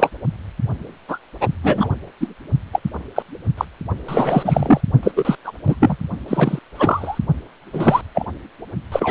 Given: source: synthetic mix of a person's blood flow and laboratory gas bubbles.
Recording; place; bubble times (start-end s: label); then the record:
Doppler ultrasound of blood flow; precordium
0.00-0.10 s: bubbles
1.08-1.18 s: bubbles
1.41-1.48 s: bubbles
1.64-1.89 s: bubbles
2.21-2.28 s: bubbles
2.73-2.79 s: bubbles
3.16-3.23 s: bubbles
3.57-3.65 s: bubbles
4.08-4.81 s: bubbles
5.03-5.11 s: bubbles
5.15-5.35 s: bubbles
5.44-5.51 s: bubbles
5.66-5.75 s: bubbles
5.79-5.96 s: bubbles
6.28-6.59 s: bubbles
6.75-7.18 s: bubbles
7.72-8.01 s: bubbles
8.14-8.26 s: bubbles
8.92-9.11 s: bubbles
From the record:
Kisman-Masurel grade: 243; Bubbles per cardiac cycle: several, 3 to 8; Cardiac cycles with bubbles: 100%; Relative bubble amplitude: loud (0.450 to 0.775); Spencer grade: 3 (all of the cardiac periods contain showers or single bubble signals, but not dominating or overriding the cardiac motion signals); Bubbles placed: only in the low amplitude regions of the cardiac cycle